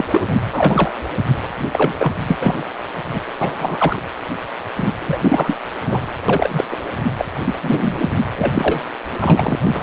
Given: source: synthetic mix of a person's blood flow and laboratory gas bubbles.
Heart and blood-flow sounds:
Doppler ultrasound of blood flow; precordium
0.00-0.07 s: bubbles
0.11-0.36 s: bubbles
0.41-0.93 s: bubbles
1.71-1.93 s: bubbles
1.99-2.12 s: bubbles
2.28-2.58 s: bubbles
3.08-3.20 s: bubbles
3.41-4.02 s: bubbles
4.77-4.92 s: bubbles
5.00-5.57 s: bubbles
5.82-6.13 s: bubbles
6.28-6.64 s: bubbles
6.71-6.77 s: bubbles
7.18-7.28 s: bubbles
7.44-7.54 s: bubbles
7.62-8.11 s: bubbles
8.36-8.81 s: bubbles
9.19-9.56 s: bubbles
9.63-9.71 s: bubbles
9.74-9.83 s: bubbles
From the record:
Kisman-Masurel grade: 343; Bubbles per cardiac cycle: rolling drumbeat, 9 or more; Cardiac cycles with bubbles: 100%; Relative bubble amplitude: loud (0.450 to 0.775); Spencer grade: 3 (all of the cardiac periods contain showers or single bubble signals, but not dominating or overriding the cardiac motion signals); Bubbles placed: anywhere in the cardiac cycle

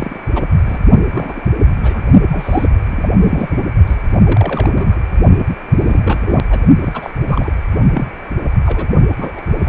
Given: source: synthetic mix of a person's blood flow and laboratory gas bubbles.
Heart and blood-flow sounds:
Doppler ultrasound of blood flow; precordium
0.00-0.18 s: bubbles
0.34-0.44 s: bubbles
0.66-0.79 s: bubbles
1.11-1.42 s: bubbles
1.82-2.03 s: bubbles
2.32-2.68 s: bubbles
2.90-3.10 s: bubbles
3.21-3.62 s: bubbles
3.86-3.96 s: bubbles
4.23-4.69 s: bubbles
4.75-5.00 s: bubbles
5.78-6.21 s: bubbles
6.25-6.45 s: bubbles
6.50-6.58 s: bubbles
6.80-7.10 s: bubbles
7.28-7.54 s: bubbles
7.94-8.06 s: bubbles
8.65-8.87 s: bubbles
9.17-9.32 s: bubbles
9.37-9.42 s: bubbles
9.65-9.69 s: bubbles
From the record:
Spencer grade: 3 (all of the cardiac periods contain showers or single bubble signals, but not dominating or overriding the cardiac motion signals); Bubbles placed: only in the low amplitude regions of the cardiac cycle

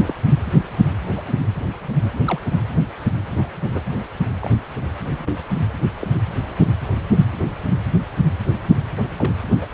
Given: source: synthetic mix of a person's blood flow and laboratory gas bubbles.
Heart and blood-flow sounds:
Doppler ultrasound of blood flow; precordium
0.00-0.14 s: bubbles
1.16-1.22 s: bubbles
1.26-1.34 s: bubbles
2.25-2.39 s: bubbles
3.38-3.49 s: bubbles
3.64-3.81 s: bubbles
4.42-4.50 s: bubbles
5.17-5.37 s: bubbles
6.00-6.08 s: bubbles
9.17-9.33 s: bubbles
9.61-9.66 s: bubbles
From the record:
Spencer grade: 2 (many but less than half of the cardiac periods contain bubble signals, singularly or in groups); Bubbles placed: anywhere in the cardiac cycle

